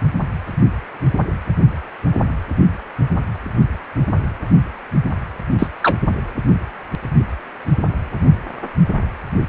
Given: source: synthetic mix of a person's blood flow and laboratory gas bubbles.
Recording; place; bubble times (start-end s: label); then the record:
Doppler ultrasound of blood flow; precordium
5.58-5.67 s: bubbles
5.83-5.98 s: bubbles
From the record:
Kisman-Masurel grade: 113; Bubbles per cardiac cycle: 1 to 2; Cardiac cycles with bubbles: 1 to 10%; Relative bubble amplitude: loud (0.450 to 0.775); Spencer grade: 1 (occasional bubble signal discernible with the cardiac motion signal, with majority of cardiac periods free of bubbles); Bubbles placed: only in the low amplitude regions of the cardiac cycle